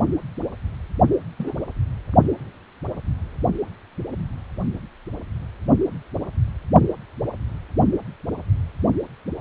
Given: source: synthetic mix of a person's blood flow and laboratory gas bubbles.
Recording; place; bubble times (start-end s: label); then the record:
Doppler ultrasound of blood flow; precordium
1.39-1.54 s: bubbles
From the record:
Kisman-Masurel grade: 112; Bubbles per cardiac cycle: 1 to 2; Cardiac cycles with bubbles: 1 to 10%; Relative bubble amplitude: moderate (0.250 to 0.450); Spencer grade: 1 (occasional bubble signal discernible with the cardiac motion signal, with majority of cardiac periods free of bubbles); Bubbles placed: anywhere in the cardiac cycle